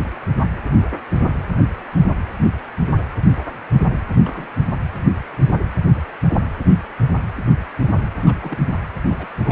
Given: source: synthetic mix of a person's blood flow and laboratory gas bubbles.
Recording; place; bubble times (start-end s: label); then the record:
Doppler ultrasound of blood flow; precordium
4.21-4.46 s: bubbles
8.26-8.58 s: bubbles
9.04-9.28 s: bubbles
9.42-9.52 s: bubbles
From the record:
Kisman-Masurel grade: 221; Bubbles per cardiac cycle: several, 3 to 8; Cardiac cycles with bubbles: 10 to 50%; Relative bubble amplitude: barely perceptible (0.100 to 0.250); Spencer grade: 2 (many but less than half of the cardiac periods contain bubble signals, singularly or in groups); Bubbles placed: anywhere in the cardiac cycle